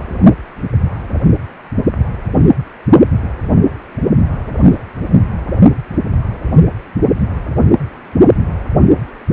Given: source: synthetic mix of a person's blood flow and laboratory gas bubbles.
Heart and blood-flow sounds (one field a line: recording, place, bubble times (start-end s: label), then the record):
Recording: Doppler ultrasound of blood flow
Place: precordium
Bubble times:
4.56-4.78 s: bubbles
From the record:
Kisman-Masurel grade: 111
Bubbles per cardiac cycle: 1 to 2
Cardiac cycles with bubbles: 1 to 10%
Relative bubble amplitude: barely perceptible (0.100 to 0.250)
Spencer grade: 1 (occasional bubble signal discernible with the cardiac motion signal, with majority of cardiac periods free of bubbles)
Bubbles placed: only in the low amplitude regions of the cardiac cycle